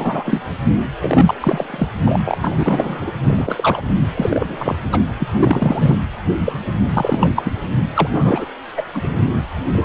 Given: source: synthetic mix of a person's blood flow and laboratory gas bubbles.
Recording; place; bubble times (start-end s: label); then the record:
Doppler ultrasound of blood flow; precordium
0.00-0.42 s: bubbles
1.00-1.34 s: bubbles
1.40-1.90 s: bubbles
2.05-2.17 s: bubbles
2.25-2.38 s: bubbles
2.42-3.12 s: bubbles
3.24-3.88 s: bubbles
4.14-4.75 s: bubbles
4.92-5.02 s: bubbles
5.19-5.28 s: bubbles
5.39-5.96 s: bubbles
6.45-6.53 s: bubbles
6.94-7.33 s: bubbles
7.36-7.51 s: bubbles
7.76-7.79 s: bubbles
7.94-8.08 s: bubbles
8.14-8.45 s: bubbles
8.77-8.82 s: bubbles
8.93-9.25 s: bubbles
9.72-9.85 s: bubbles
From the record:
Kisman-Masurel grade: 243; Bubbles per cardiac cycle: several, 3 to 8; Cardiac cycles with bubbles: 100%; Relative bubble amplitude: loud (0.450 to 0.775); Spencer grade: 3 (all of the cardiac periods contain showers or single bubble signals, but not dominating or overriding the cardiac motion signals); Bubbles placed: anywhere in the cardiac cycle